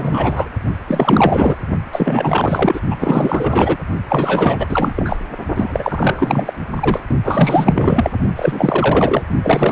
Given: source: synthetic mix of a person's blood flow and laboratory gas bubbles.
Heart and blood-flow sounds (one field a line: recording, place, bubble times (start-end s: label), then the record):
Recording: Doppler ultrasound of blood flow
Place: precordium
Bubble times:
0.00-0.50 s: bubbles
0.88-1.56 s: bubbles
1.92-2.81 s: bubbles
2.90-2.96 s: bubbles
3.00-3.77 s: bubbles
4.08-4.94 s: bubbles
4.96-5.17 s: bubbles
5.56-6.53 s: bubbles
6.75-7.00 s: bubbles
7.24-8.10 s: bubbles
8.36-9.23 s: bubbles
9.42-9.72 s: bubbles
From the record:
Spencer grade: 4 (maximum detectable bubble signal sounding continuously throughout systole and diastole of every cardiac period, and overriding the amplitude of the normal cardiac signals)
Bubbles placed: only in the low amplitude regions of the cardiac cycle